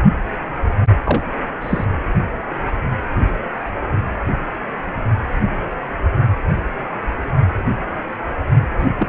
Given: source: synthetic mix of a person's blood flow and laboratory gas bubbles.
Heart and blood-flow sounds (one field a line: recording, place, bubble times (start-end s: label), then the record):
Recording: Doppler ultrasound of blood flow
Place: precordium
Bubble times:
1.04-1.23 s: bubbles
1.61-1.85 s: bubbles
8.79-8.87 s: bubbles
8.99-9.09 s: bubbles
From the record:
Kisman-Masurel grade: 222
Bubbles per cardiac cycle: several, 3 to 8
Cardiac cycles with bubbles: 10 to 50%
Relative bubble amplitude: moderate (0.250 to 0.450)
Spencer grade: 2 (many but less than half of the cardiac periods contain bubble signals, singularly or in groups)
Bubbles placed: only in the low amplitude regions of the cardiac cycle